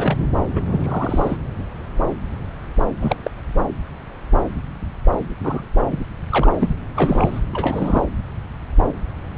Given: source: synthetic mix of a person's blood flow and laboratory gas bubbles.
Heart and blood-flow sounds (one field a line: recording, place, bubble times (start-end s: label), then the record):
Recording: Doppler ultrasound of blood flow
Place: subclavian vein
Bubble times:
0.00-0.17 s: bubbles
0.55-0.61 s: bubbles
0.66-1.36 s: bubbles
3.00-3.16 s: bubbles
3.23-3.30 s: bubbles
5.41-5.65 s: bubbles
5.83-6.04 s: bubbles
6.30-6.52 s: bubbles
6.58-6.76 s: bubbles
6.95-7.40 s: bubbles
7.53-8.02 s: bubbles
From the record:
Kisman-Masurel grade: 222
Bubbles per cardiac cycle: several, 3 to 8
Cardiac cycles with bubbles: 10 to 50%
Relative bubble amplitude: moderate (0.250 to 0.450)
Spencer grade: 2 (many but less than half of the cardiac periods contain bubble signals, singularly or in groups)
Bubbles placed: anywhere in the cardiac cycle